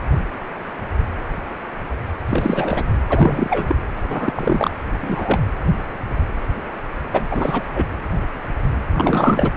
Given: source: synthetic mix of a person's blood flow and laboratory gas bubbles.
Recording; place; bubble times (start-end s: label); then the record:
Doppler ultrasound of blood flow; precordium
2.28-2.89 s: bubbles
3.09-3.75 s: bubbles
4.08-4.70 s: bubbles
5.01-5.40 s: bubbles
7.13-7.26 s: bubbles
7.31-7.63 s: bubbles
7.74-7.85 s: bubbles
8.93-9.52 s: bubbles
From the record:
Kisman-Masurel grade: 223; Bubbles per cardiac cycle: several, 3 to 8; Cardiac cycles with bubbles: 10 to 50%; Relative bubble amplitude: loud (0.450 to 0.775); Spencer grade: 2 (many but less than half of the cardiac periods contain bubble signals, singularly or in groups); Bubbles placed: anywhere in the cardiac cycle